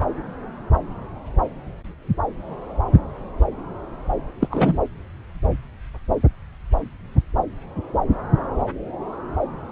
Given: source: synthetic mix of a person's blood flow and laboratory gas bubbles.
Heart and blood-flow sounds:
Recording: Doppler ultrasound of blood flow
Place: subclavian vein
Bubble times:
4.40-4.48 s: bubbles
4.50-4.79 s: bubbles
From the record:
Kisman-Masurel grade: 122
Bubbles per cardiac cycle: 1 to 2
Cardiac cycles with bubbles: 10 to 50%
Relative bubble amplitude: moderate (0.250 to 0.450)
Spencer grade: 2 (many but less than half of the cardiac periods contain bubble signals, singularly or in groups)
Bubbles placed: anywhere in the cardiac cycle

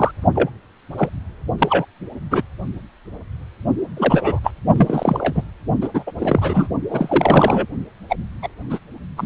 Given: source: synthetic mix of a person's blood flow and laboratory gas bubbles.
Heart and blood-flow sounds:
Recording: Doppler ultrasound of blood flow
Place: precordium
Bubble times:
0.00-0.11 s: bubbles
0.35-0.50 s: bubbles
0.98-1.09 s: bubbles
1.58-1.85 s: bubbles
2.31-2.42 s: bubbles
3.96-4.39 s: bubbles
4.43-4.51 s: bubbles
4.75-5.43 s: bubbles
5.80-5.88 s: bubbles
5.94-6.03 s: bubbles
6.07-6.12 s: bubbles
6.18-6.68 s: bubbles
6.90-7.66 s: bubbles
8.10-8.16 s: bubbles
8.42-8.48 s: bubbles
8.70-8.79 s: bubbles
9.17-9.26 s: bubbles
From the record:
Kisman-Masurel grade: 233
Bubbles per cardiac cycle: several, 3 to 8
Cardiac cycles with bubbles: 50 to 99%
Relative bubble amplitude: loud (0.450 to 0.775)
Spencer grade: 3 (all of the cardiac periods contain showers or single bubble signals, but not dominating or overriding the cardiac motion signals)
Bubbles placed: only in the low amplitude regions of the cardiac cycle

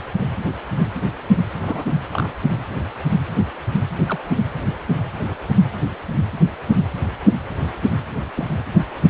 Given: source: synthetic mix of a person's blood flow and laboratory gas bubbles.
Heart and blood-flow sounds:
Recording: Doppler ultrasound of blood flow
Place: precordium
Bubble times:
1.63-1.84 s: bubbles
2.11-2.29 s: bubbles
4.08-4.18 s: bubbles
8.37-8.48 s: bubbles
From the record:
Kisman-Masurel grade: 121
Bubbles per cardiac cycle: 1 to 2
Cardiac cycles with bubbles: 10 to 50%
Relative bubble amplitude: barely perceptible (0.100 to 0.250)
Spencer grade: 2 (many but less than half of the cardiac periods contain bubble signals, singularly or in groups)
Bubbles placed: anywhere in the cardiac cycle

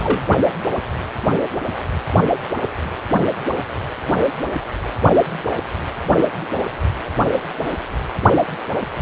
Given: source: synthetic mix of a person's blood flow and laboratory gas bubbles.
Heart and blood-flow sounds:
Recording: Doppler ultrasound of blood flow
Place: precordium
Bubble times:
0.04-0.23 s: bubbles
From the record:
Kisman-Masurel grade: 112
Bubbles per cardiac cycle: 1 to 2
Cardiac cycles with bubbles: 1 to 10%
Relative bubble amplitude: moderate (0.250 to 0.450)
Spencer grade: 1 (occasional bubble signal discernible with the cardiac motion signal, with majority of cardiac periods free of bubbles)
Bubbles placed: only in the low amplitude regions of the cardiac cycle

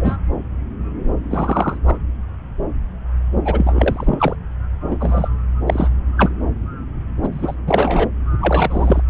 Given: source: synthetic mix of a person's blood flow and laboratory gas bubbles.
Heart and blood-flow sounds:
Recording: Doppler ultrasound of blood flow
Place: subclavian vein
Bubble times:
0.00-0.16 s: bubbles
1.29-1.78 s: bubbles
1.86-1.97 s: bubbles
3.45-4.35 s: bubbles
4.90-5.28 s: bubbles
5.67-5.89 s: bubbles
6.17-6.29 s: bubbles
7.22-7.29 s: bubbles
7.32-7.55 s: bubbles
7.66-8.08 s: bubbles
8.39-9.02 s: bubbles
From the record:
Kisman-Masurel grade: 232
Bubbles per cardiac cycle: several, 3 to 8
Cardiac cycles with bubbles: 50 to 99%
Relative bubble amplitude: moderate (0.250 to 0.450)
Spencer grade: 3 (all of the cardiac periods contain showers or single bubble signals, but not dominating or overriding the cardiac motion signals)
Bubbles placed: anywhere in the cardiac cycle

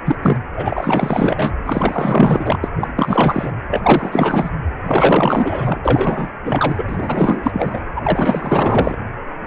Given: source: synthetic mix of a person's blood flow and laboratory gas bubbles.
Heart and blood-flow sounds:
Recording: Doppler ultrasound of blood flow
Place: precordium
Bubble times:
0.05-0.16 s: bubbles
0.21-0.37 s: bubbles
0.54-1.53 s: bubbles
1.64-2.59 s: bubbles
2.63-2.68 s: bubbles
2.76-2.92 s: bubbles
2.96-3.51 s: bubbles
3.70-4.50 s: bubbles
4.85-5.79 s: bubbles
5.85-6.30 s: bubbles
6.44-7.80 s: bubbles
7.96-8.96 s: bubbles
From the record:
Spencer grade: 4 (maximum detectable bubble signal sounding continuously throughout systole and diastole of every cardiac period, and overriding the amplitude of the normal cardiac signals)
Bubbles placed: anywhere in the cardiac cycle

